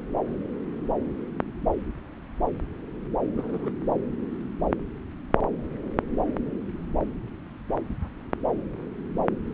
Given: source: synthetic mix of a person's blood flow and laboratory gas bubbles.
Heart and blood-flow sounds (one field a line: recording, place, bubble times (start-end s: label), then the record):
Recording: Doppler ultrasound of blood flow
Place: subclavian vein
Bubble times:
3.37-3.71 s: bubbles
From the record:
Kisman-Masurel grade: 121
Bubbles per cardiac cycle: 1 to 2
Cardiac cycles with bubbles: 10 to 50%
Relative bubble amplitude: barely perceptible (0.100 to 0.250)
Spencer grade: 2 (many but less than half of the cardiac periods contain bubble signals, singularly or in groups)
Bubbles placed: anywhere in the cardiac cycle